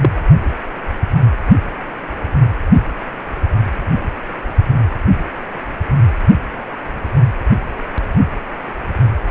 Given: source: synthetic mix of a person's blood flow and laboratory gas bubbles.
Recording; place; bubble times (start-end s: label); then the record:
Doppler ultrasound of blood flow; precordium
0.01-0.09 s: bubbles
From the record:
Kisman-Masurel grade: 113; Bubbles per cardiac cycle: 1 to 2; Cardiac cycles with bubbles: 1 to 10%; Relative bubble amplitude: loud (0.450 to 0.775); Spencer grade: 1 (occasional bubble signal discernible with the cardiac motion signal, with majority of cardiac periods free of bubbles); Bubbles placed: only in the low amplitude regions of the cardiac cycle